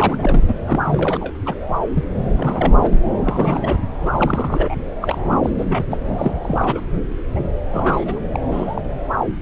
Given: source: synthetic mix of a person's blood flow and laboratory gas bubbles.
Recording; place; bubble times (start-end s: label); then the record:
Doppler ultrasound of blood flow; subclavian vein
0.00-0.54 s: bubbles
0.67-1.32 s: bubbles
1.45-1.54 s: bubbles
1.95-2.04 s: bubbles
2.37-2.73 s: bubbles
2.81-2.99 s: bubbles
3.19-3.79 s: bubbles
4.00-4.75 s: bubbles
5.00-5.18 s: bubbles
5.30-5.38 s: bubbles
5.43-5.50 s: bubbles
5.57-5.65 s: bubbles
5.68-5.84 s: bubbles
5.90-5.97 s: bubbles
6.17-6.35 s: bubbles
6.42-6.81 s: bubbles
7.34-7.40 s: bubbles
7.66-8.20 s: bubbles
8.33-8.40 s: bubbles
8.51-8.82 s: bubbles
From the record:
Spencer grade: 3 (all of the cardiac periods contain showers or single bubble signals, but not dominating or overriding the cardiac motion signals); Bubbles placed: anywhere in the cardiac cycle